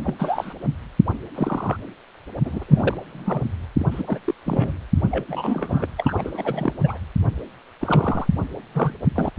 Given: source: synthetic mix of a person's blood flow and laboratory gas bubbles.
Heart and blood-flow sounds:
Doppler ultrasound of blood flow; precordium
0.05-0.14 s: bubbles
0.19-0.53 s: bubbles
1.34-1.77 s: bubbles
2.44-2.64 s: bubbles
2.68-2.98 s: bubbles
3.09-3.43 s: bubbles
3.77-3.86 s: bubbles
3.91-4.03 s: bubbles
4.06-4.20 s: bubbles
4.24-4.35 s: bubbles
4.46-4.78 s: bubbles
5.11-5.24 s: bubbles
5.29-5.87 s: bubbles
5.97-6.73 s: bubbles
6.84-6.97 s: bubbles
7.80-8.27 s: bubbles
8.74-8.93 s: bubbles
9.15-9.31 s: bubbles
From the record:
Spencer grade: 3 (all of the cardiac periods contain showers or single bubble signals, but not dominating or overriding the cardiac motion signals); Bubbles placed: anywhere in the cardiac cycle

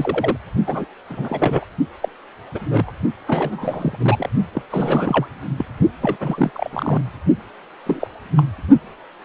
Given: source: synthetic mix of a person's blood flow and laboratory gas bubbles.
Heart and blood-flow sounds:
Doppler ultrasound of blood flow; precordium
0.00-0.36 s: bubbles
0.67-0.85 s: bubbles
1.09-1.65 s: bubbles
2.01-2.08 s: bubbles
2.54-2.92 s: bubbles
3.28-4.29 s: bubbles
4.54-4.62 s: bubbles
4.70-5.27 s: bubbles
5.58-5.65 s: bubbles
6.01-6.17 s: bubbles
6.20-6.69 s: bubbles
6.73-7.01 s: bubbles
7.86-8.08 s: bubbles
8.36-8.45 s: bubbles
From the record:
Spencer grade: 3 (all of the cardiac periods contain showers or single bubble signals, but not dominating or overriding the cardiac motion signals); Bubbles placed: only in the low amplitude regions of the cardiac cycle

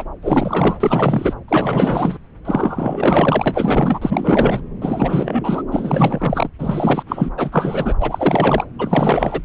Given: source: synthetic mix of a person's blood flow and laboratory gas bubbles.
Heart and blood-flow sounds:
Doppler ultrasound of blood flow; subclavian vein
0.00-0.04 s: bubbles
0.22-1.33 s: bubbles
1.48-2.18 s: bubbles
2.45-3.98 s: bubbles
4.01-4.62 s: bubbles
4.81-5.62 s: bubbles
5.71-6.50 s: bubbles
6.58-7.03 s: bubbles
7.07-7.29 s: bubbles
7.37-7.94 s: bubbles
8.00-8.65 s: bubbles
8.79-9.42 s: bubbles
From the record:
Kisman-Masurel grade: 444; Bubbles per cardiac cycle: continuous sound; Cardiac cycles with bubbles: 100%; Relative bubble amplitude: maximal (0.775 to 0.999); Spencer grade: 4 (maximum detectable bubble signal sounding continuously throughout systole and diastole of every cardiac period, and overriding the amplitude of the normal cardiac signals); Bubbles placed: anywhere in the cardiac cycle

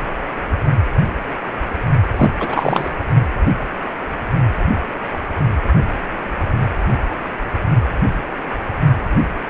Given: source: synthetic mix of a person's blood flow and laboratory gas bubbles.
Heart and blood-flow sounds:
Doppler ultrasound of blood flow; precordium
2.16-2.30 s: bubbles
2.40-2.90 s: bubbles
From the record:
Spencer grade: 1 (occasional bubble signal discernible with the cardiac motion signal, with majority of cardiac periods free of bubbles); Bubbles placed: only in the low amplitude regions of the cardiac cycle

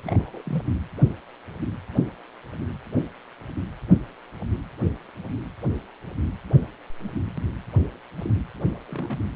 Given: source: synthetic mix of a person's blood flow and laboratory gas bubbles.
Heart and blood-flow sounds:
Doppler ultrasound of blood flow; precordium
0.04-0.42 s: bubbles
0.46-0.62 s: bubbles
7.04-7.10 s: bubbles
8.17-8.33 s: bubbles
8.88-9.19 s: bubbles
From the record:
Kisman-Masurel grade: 121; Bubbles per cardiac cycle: 1 to 2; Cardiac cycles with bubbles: 10 to 50%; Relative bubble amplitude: barely perceptible (0.100 to 0.250); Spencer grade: 2 (many but less than half of the cardiac periods contain bubble signals, singularly or in groups); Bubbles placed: anywhere in the cardiac cycle

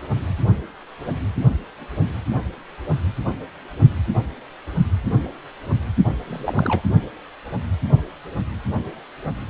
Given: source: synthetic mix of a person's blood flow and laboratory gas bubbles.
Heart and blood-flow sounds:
Doppler ultrasound of blood flow; precordium
6.27-6.82 s: bubbles
From the record:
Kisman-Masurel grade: 111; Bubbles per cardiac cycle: 1 to 2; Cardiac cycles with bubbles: 1 to 10%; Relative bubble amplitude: barely perceptible (0.100 to 0.250); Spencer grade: 1 (occasional bubble signal discernible with the cardiac motion signal, with majority of cardiac periods free of bubbles); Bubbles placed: only in the low amplitude regions of the cardiac cycle

